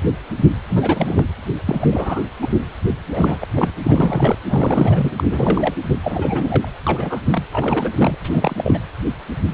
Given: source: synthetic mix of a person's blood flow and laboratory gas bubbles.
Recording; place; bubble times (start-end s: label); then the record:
Doppler ultrasound of blood flow; precordium
0.69-1.26 s: bubbles
1.66-1.88 s: bubbles
1.91-2.22 s: bubbles
2.41-2.49 s: bubbles
3.12-3.38 s: bubbles
3.41-3.47 s: bubbles
3.55-3.72 s: bubbles
3.83-4.35 s: bubbles
4.48-5.11 s: bubbles
5.16-5.74 s: bubbles
6.02-6.68 s: bubbles
6.86-7.20 s: bubbles
7.31-7.42 s: bubbles
7.51-7.93 s: bubbles
7.97-8.18 s: bubbles
8.24-8.79 s: bubbles
From the record:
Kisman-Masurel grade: 332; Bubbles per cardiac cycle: rolling drumbeat, 9 or more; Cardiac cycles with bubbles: 50 to 99%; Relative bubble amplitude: moderate (0.250 to 0.450); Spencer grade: 3 (all of the cardiac periods contain showers or single bubble signals, but not dominating or overriding the cardiac motion signals); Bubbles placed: anywhere in the cardiac cycle